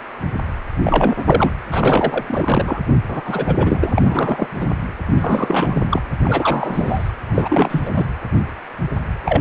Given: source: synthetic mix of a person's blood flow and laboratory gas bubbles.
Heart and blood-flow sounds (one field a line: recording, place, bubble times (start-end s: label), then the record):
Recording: Doppler ultrasound of blood flow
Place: precordium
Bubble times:
0.81-1.15 s: bubbles
1.18-1.54 s: bubbles
1.71-2.81 s: bubbles
3.08-3.22 s: bubbles
3.25-3.54 s: bubbles
3.58-4.48 s: bubbles
4.55-4.71 s: bubbles
5.16-5.83 s: bubbles
5.86-6.01 s: bubbles
6.24-7.12 s: bubbles
7.26-8.06 s: bubbles
9.25-9.41 s: bubbles
From the record:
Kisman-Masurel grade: 333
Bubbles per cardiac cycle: rolling drumbeat, 9 or more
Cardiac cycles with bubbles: 50 to 99%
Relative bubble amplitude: loud (0.450 to 0.775)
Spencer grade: 3 (all of the cardiac periods contain showers or single bubble signals, but not dominating or overriding the cardiac motion signals)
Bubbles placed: anywhere in the cardiac cycle